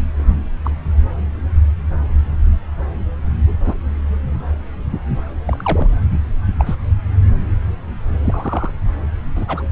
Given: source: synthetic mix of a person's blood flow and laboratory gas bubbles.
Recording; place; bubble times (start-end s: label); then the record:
Doppler ultrasound of blood flow; subclavian vein
0.64-0.70 s: bubbles
3.65-3.74 s: bubbles
5.47-5.91 s: bubbles
6.58-6.75 s: bubbles
8.22-8.73 s: bubbles
9.36-9.66 s: bubbles
From the record:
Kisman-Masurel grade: 122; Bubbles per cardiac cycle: 1 to 2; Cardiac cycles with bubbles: 10 to 50%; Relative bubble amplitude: moderate (0.250 to 0.450); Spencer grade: 2 (many but less than half of the cardiac periods contain bubble signals, singularly or in groups); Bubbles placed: anywhere in the cardiac cycle